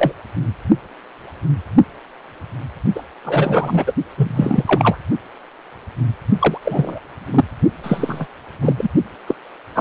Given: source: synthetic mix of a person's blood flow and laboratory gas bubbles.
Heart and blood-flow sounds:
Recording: Doppler ultrasound of blood flow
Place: precordium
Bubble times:
0.00-0.12 s: bubbles
2.95-3.03 s: bubbles
3.24-3.92 s: bubbles
4.17-4.98 s: bubbles
6.39-6.58 s: bubbles
6.65-6.99 s: bubbles
7.33-7.45 s: bubbles
7.83-8.27 s: bubbles
8.62-8.73 s: bubbles
8.78-8.90 s: bubbles
9.27-9.35 s: bubbles
9.75-9.81 s: bubbles
From the record:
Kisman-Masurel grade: 233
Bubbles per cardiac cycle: several, 3 to 8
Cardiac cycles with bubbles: 50 to 99%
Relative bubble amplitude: loud (0.450 to 0.775)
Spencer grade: 3 (all of the cardiac periods contain showers or single bubble signals, but not dominating or overriding the cardiac motion signals)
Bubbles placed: only in the low amplitude regions of the cardiac cycle

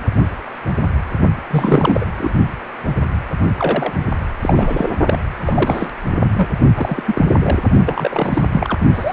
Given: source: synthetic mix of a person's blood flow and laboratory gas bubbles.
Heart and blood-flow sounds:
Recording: Doppler ultrasound of blood flow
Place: precordium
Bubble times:
1.50-2.05 s: bubbles
2.17-2.35 s: bubbles
3.58-3.92 s: bubbles
4.40-4.92 s: bubbles
5.07-5.17 s: bubbles
5.37-5.87 s: bubbles
6.35-6.49 s: bubbles
6.75-7.25 s: bubbles
7.38-7.60 s: bubbles
7.85-8.42 s: bubbles
8.51-8.79 s: bubbles
8.93-9.13 s: bubbles
From the record:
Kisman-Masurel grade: 332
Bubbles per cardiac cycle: rolling drumbeat, 9 or more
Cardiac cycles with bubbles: 50 to 99%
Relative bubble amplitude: moderate (0.250 to 0.450)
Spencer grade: 3 (all of the cardiac periods contain showers or single bubble signals, but not dominating or overriding the cardiac motion signals)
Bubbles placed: only in the low amplitude regions of the cardiac cycle

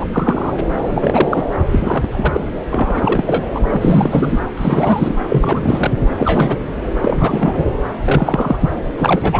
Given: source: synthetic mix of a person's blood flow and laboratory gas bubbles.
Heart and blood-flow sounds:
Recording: Doppler ultrasound of blood flow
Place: subclavian vein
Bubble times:
0.00-0.05 s: bubbles
0.12-0.58 s: bubbles
0.85-1.44 s: bubbles
1.72-2.53 s: bubbles
2.70-3.43 s: bubbles
3.54-3.60 s: bubbles
3.69-4.40 s: bubbles
4.57-5.15 s: bubbles
5.29-5.92 s: bubbles
6.17-6.58 s: bubbles
7.02-7.66 s: bubbles
8.04-8.59 s: bubbles
8.61-8.70 s: bubbles
8.97-9.40 s: bubbles
From the record:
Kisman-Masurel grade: 243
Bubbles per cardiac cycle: several, 3 to 8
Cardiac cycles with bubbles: 100%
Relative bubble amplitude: loud (0.450 to 0.775)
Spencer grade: 3 (all of the cardiac periods contain showers or single bubble signals, but not dominating or overriding the cardiac motion signals)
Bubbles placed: anywhere in the cardiac cycle

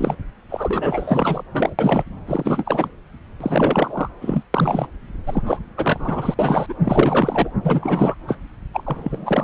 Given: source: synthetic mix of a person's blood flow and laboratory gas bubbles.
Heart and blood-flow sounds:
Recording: Doppler ultrasound of blood flow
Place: subclavian vein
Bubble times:
0.00-0.15 s: bubbles
0.49-1.44 s: bubbles
1.51-1.75 s: bubbles
1.79-2.04 s: bubbles
2.27-2.90 s: bubbles
3.40-4.09 s: bubbles
4.21-4.43 s: bubbles
4.54-4.88 s: bubbles
5.27-5.43 s: bubbles
5.46-5.59 s: bubbles
5.77-6.35 s: bubbles
6.38-6.74 s: bubbles
6.83-7.51 s: bubbles
7.63-8.14 s: bubbles
8.27-8.36 s: bubbles
8.73-9.44 s: bubbles
From the record:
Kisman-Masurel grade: 444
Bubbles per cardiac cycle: continuous sound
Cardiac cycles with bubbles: 100%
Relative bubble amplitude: maximal (0.775 to 0.999)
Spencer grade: 4 (maximum detectable bubble signal sounding continuously throughout systole and diastole of every cardiac period, and overriding the amplitude of the normal cardiac signals)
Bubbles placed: anywhere in the cardiac cycle

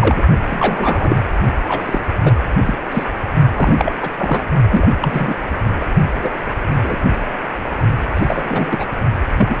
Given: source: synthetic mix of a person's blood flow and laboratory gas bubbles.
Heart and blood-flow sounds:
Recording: Doppler ultrasound of blood flow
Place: precordium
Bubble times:
0.00-0.22 s: bubbles
0.50-1.17 s: bubbles
1.68-2.01 s: bubbles
2.23-2.33 s: bubbles
2.65-2.75 s: bubbles
2.91-3.04 s: bubbles
3.56-3.93 s: bubbles
4.01-4.10 s: bubbles
4.17-4.49 s: bubbles
4.70-4.88 s: bubbles
5.00-5.35 s: bubbles
5.79-5.89 s: bubbles
6.22-6.30 s: bubbles
6.82-6.96 s: bubbles
8.14-8.69 s: bubbles
8.71-8.86 s: bubbles
9.37-9.57 s: bubbles
From the record:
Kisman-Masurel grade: 243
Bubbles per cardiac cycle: several, 3 to 8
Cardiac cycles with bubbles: 100%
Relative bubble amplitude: loud (0.450 to 0.775)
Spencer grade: 3 (all of the cardiac periods contain showers or single bubble signals, but not dominating or overriding the cardiac motion signals)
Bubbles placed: only in the low amplitude regions of the cardiac cycle

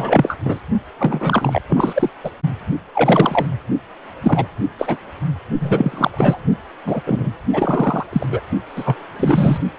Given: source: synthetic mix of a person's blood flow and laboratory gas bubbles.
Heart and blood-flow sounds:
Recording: Doppler ultrasound of blood flow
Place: precordium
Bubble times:
0.00-0.37 s: bubbles
0.45-0.58 s: bubbles
0.99-1.61 s: bubbles
1.69-2.09 s: bubbles
2.23-2.31 s: bubbles
2.94-3.46 s: bubbles
4.23-4.46 s: bubbles
4.78-4.97 s: bubbles
5.60-6.41 s: bubbles
6.85-7.01 s: bubbles
7.06-7.32 s: bubbles
7.53-8.06 s: bubbles
8.12-8.26 s: bubbles
8.30-8.41 s: bubbles
8.75-8.96 s: bubbles
9.19-9.58 s: bubbles
From the record:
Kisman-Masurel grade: 243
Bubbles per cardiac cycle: several, 3 to 8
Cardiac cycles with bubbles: 100%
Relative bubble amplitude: loud (0.450 to 0.775)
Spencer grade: 3 (all of the cardiac periods contain showers or single bubble signals, but not dominating or overriding the cardiac motion signals)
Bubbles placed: only in the low amplitude regions of the cardiac cycle

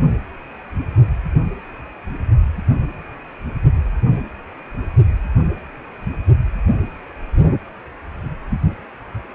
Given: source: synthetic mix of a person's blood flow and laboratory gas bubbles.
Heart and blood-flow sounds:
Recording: Doppler ultrasound of blood flow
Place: precordium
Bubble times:
no bubbles
From the record:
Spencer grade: 0 (complete lack of bubble signals)

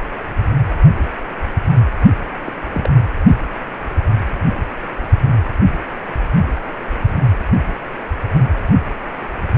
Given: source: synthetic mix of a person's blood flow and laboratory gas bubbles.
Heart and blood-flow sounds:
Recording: Doppler ultrasound of blood flow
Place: precordium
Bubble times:
2.44-2.52 s: bubbles
2.73-2.90 s: bubbles
From the record:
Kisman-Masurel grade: 211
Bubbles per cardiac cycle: several, 3 to 8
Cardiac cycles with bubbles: 1 to 10%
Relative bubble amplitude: barely perceptible (0.100 to 0.250)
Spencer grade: 1 (occasional bubble signal discernible with the cardiac motion signal, with majority of cardiac periods free of bubbles)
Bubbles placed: anywhere in the cardiac cycle

